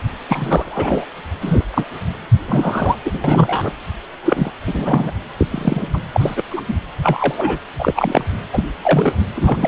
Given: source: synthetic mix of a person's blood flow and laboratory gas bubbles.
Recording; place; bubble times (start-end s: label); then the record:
Doppler ultrasound of blood flow; precordium
0.28-1.05 s: bubbles
1.41-1.65 s: bubbles
1.71-1.85 s: bubbles
2.48-2.97 s: bubbles
3.05-3.19 s: bubbles
3.24-3.73 s: bubbles
4.25-4.51 s: bubbles
4.67-5.11 s: bubbles
5.38-5.46 s: bubbles
5.50-5.88 s: bubbles
5.94-5.99 s: bubbles
6.12-6.42 s: bubbles
6.50-6.61 s: bubbles
6.69-6.75 s: bubbles
7.03-7.58 s: bubbles
7.79-8.24 s: bubbles
8.52-8.63 s: bubbles
8.82-9.12 s: bubbles
9.35-9.68 s: bubbles
From the record:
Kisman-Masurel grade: 243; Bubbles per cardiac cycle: several, 3 to 8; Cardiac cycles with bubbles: 100%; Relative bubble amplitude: loud (0.450 to 0.775); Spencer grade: 3 (all of the cardiac periods contain showers or single bubble signals, but not dominating or overriding the cardiac motion signals); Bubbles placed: anywhere in the cardiac cycle